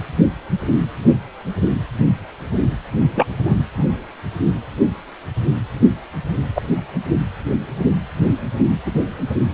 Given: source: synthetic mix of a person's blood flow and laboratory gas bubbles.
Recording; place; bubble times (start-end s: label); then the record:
Doppler ultrasound of blood flow; precordium
3.15-3.27 s: bubbles
3.45-3.56 s: bubbles
3.77-3.85 s: bubbles
6.55-6.81 s: bubbles
8.86-8.92 s: bubbles
From the record:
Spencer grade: 2 (many but less than half of the cardiac periods contain bubble signals, singularly or in groups); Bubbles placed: anywhere in the cardiac cycle